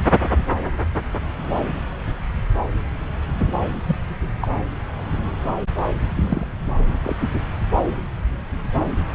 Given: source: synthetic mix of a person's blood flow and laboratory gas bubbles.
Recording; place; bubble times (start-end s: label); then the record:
Doppler ultrasound of blood flow; subclavian vein
0.11-0.20 s: bubbles
3.87-3.96 s: bubbles
4.41-4.50 s: bubbles
6.15-6.47 s: bubbles
7.02-7.16 s: bubbles
From the record:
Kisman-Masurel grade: 122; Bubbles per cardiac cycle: 1 to 2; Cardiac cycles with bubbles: 10 to 50%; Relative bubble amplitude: moderate (0.250 to 0.450); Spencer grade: 2 (many but less than half of the cardiac periods contain bubble signals, singularly or in groups); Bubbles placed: anywhere in the cardiac cycle